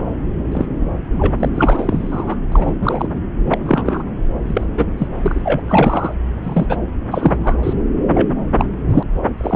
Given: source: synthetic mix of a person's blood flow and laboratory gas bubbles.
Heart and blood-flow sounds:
Doppler ultrasound of blood flow; subclavian vein
0.52-0.66 s: bubbles
1.18-1.34 s: bubbles
1.39-1.49 s: bubbles
1.55-2.36 s: bubbles
2.51-2.74 s: bubbles
2.80-3.07 s: bubbles
3.46-3.58 s: bubbles
3.63-4.03 s: bubbles
4.47-4.65 s: bubbles
4.77-4.86 s: bubbles
4.97-5.08 s: bubbles
5.19-5.61 s: bubbles
5.67-6.14 s: bubbles
6.43-6.66 s: bubbles
6.68-6.77 s: bubbles
7.11-7.36 s: bubbles
7.43-7.58 s: bubbles
7.63-7.73 s: bubbles
8.14-8.28 s: bubbles
8.58-8.66 s: bubbles
8.89-9.03 s: bubbles
9.23-9.28 s: bubbles
9.38-9.56 s: bubbles
From the record:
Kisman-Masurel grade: 243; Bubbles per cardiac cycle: several, 3 to 8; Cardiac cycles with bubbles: 100%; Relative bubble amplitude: loud (0.450 to 0.775); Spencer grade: 3 (all of the cardiac periods contain showers or single bubble signals, but not dominating or overriding the cardiac motion signals); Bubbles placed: anywhere in the cardiac cycle

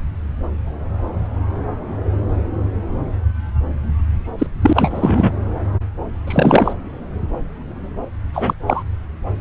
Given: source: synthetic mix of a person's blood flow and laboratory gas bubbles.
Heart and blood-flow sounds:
Doppler ultrasound of blood flow; subclavian vein
4.38-4.46 s: bubbles
4.61-5.32 s: bubbles
6.27-6.73 s: bubbles
8.34-8.54 s: bubbles
8.67-8.83 s: bubbles
From the record:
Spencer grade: 2 (many but less than half of the cardiac periods contain bubble signals, singularly or in groups); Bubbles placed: anywhere in the cardiac cycle

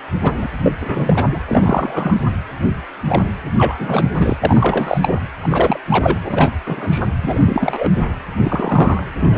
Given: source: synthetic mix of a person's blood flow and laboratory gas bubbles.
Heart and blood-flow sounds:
Doppler ultrasound of blood flow; precordium
0.23-0.48 s: bubbles
0.63-0.72 s: bubbles
0.81-1.27 s: bubbles
1.31-1.40 s: bubbles
1.47-2.18 s: bubbles
3.08-3.30 s: bubbles
3.57-4.08 s: bubbles
4.15-4.37 s: bubbles
4.43-5.21 s: bubbles
5.42-5.80 s: bubbles
5.88-6.19 s: bubbles
6.24-6.52 s: bubbles
6.66-7.08 s: bubbles
7.23-7.38 s: bubbles
7.46-7.90 s: bubbles
8.43-9.03 s: bubbles
9.20-9.38 s: bubbles
From the record:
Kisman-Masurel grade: 243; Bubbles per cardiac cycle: several, 3 to 8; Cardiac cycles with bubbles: 100%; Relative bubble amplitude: loud (0.450 to 0.775); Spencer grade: 3 (all of the cardiac periods contain showers or single bubble signals, but not dominating or overriding the cardiac motion signals); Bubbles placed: anywhere in the cardiac cycle

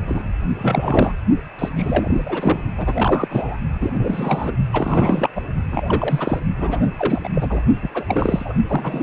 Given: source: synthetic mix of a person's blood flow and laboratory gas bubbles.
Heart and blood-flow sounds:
Doppler ultrasound of blood flow; precordium
0.07-0.23 s: bubbles
0.57-1.13 s: bubbles
1.59-1.69 s: bubbles
1.76-2.62 s: bubbles
2.77-3.57 s: bubbles
3.80-3.90 s: bubbles
3.93-4.52 s: bubbles
4.72-5.30 s: bubbles
5.35-5.41 s: bubbles
5.71-6.39 s: bubbles
6.58-6.83 s: bubbles
6.97-7.29 s: bubbles
7.34-7.62 s: bubbles
7.81-7.89 s: bubbles
7.94-8.05 s: bubbles
8.07-8.54 s: bubbles
8.67-9.03 s: bubbles
From the record:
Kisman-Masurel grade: 343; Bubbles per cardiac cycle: rolling drumbeat, 9 or more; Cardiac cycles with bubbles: 100%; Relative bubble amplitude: loud (0.450 to 0.775); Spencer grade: 3 (all of the cardiac periods contain showers or single bubble signals, but not dominating or overriding the cardiac motion signals); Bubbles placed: only in the low amplitude regions of the cardiac cycle

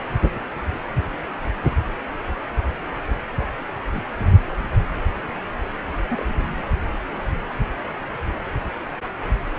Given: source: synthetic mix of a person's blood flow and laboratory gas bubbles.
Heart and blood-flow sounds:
Doppler ultrasound of blood flow; precordium
3.37-3.46 s: bubbles
3.92-4.03 s: bubbles
6.08-6.22 s: bubbles
6.33-6.47 s: bubbles
From the record:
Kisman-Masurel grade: 121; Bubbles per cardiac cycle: 1 to 2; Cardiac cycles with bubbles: 10 to 50%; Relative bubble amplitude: barely perceptible (0.100 to 0.250); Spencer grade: 2 (many but less than half of the cardiac periods contain bubble signals, singularly or in groups); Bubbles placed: anywhere in the cardiac cycle

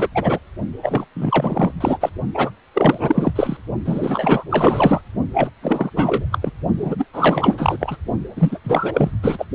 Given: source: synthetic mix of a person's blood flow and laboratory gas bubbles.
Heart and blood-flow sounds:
Doppler ultrasound of blood flow; precordium
0.00-0.08 s: bubbles
0.14-0.39 s: bubbles
0.82-1.05 s: bubbles
1.15-1.73 s: bubbles
1.80-2.09 s: bubbles
2.34-2.50 s: bubbles
2.74-3.31 s: bubbles
3.35-3.57 s: bubbles
3.85-4.44 s: bubbles
4.50-5.01 s: bubbles
5.33-5.49 s: bubbles
5.62-5.91 s: bubbles
5.96-6.25 s: bubbles
6.31-6.38 s: bubbles
6.42-6.51 s: bubbles
6.78-7.05 s: bubbles
7.13-7.77 s: bubbles
7.79-7.97 s: bubbles
8.36-8.58 s: bubbles
8.63-9.11 s: bubbles
9.22-9.46 s: bubbles
From the record:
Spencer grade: 4 (maximum detectable bubble signal sounding continuously throughout systole and diastole of every cardiac period, and overriding the amplitude of the normal cardiac signals); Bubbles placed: only in the low amplitude regions of the cardiac cycle

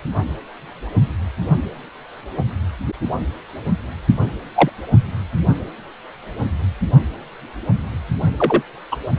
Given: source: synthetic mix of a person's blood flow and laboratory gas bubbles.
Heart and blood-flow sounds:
Doppler ultrasound of blood flow; precordium
4.55-4.70 s: bubbles
8.38-8.62 s: bubbles
8.91-8.96 s: bubbles
From the record:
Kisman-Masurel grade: 123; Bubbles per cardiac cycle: 1 to 2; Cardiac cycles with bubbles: 10 to 50%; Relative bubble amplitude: loud (0.450 to 0.775); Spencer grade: 2 (many but less than half of the cardiac periods contain bubble signals, singularly or in groups); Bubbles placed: only in the low amplitude regions of the cardiac cycle

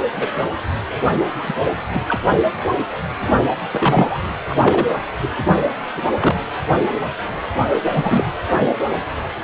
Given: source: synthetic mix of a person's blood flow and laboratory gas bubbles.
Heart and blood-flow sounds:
Doppler ultrasound of blood flow; precordium
0.16-0.28 s: bubbles
1.42-1.54 s: bubbles
1.94-2.00 s: bubbles
2.06-2.19 s: bubbles
2.28-2.38 s: bubbles
3.71-4.21 s: bubbles
4.49-4.55 s: bubbles
4.62-4.86 s: bubbles
5.22-5.28 s: bubbles
5.95-6.02 s: bubbles
6.20-6.35 s: bubbles
7.85-8.24 s: bubbles
From the record:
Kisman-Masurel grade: 233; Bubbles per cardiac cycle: several, 3 to 8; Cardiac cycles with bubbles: 50 to 99%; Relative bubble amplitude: loud (0.450 to 0.775); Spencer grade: 3 (all of the cardiac periods contain showers or single bubble signals, but not dominating or overriding the cardiac motion signals); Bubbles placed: anywhere in the cardiac cycle

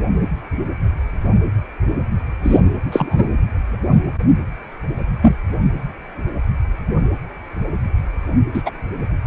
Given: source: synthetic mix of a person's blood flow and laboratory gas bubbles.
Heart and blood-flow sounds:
Doppler ultrasound of blood flow; precordium
2.42-2.60 s: bubbles
2.92-3.25 s: bubbles
5.21-5.35 s: bubbles
8.54-8.62 s: bubbles
8.65-8.71 s: bubbles
From the record:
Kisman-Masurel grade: 123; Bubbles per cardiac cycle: 1 to 2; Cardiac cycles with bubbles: 10 to 50%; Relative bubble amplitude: loud (0.450 to 0.775); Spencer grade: 2 (many but less than half of the cardiac periods contain bubble signals, singularly or in groups); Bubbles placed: anywhere in the cardiac cycle

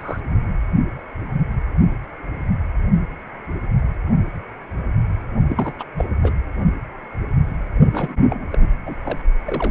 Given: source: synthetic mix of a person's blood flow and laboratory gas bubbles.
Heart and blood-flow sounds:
Doppler ultrasound of blood flow; precordium
0.00-0.20 s: bubbles
5.49-5.74 s: bubbles
5.79-5.83 s: bubbles
5.97-6.05 s: bubbles
6.22-6.33 s: bubbles
7.92-8.18 s: bubbles
8.29-8.58 s: bubbles
8.86-8.96 s: bubbles
9.04-9.18 s: bubbles
9.46-9.71 s: bubbles
From the record:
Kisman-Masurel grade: 232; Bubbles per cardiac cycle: several, 3 to 8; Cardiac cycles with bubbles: 50 to 99%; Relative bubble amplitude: moderate (0.250 to 0.450); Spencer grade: 3 (all of the cardiac periods contain showers or single bubble signals, but not dominating or overriding the cardiac motion signals); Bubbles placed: only in the low amplitude regions of the cardiac cycle

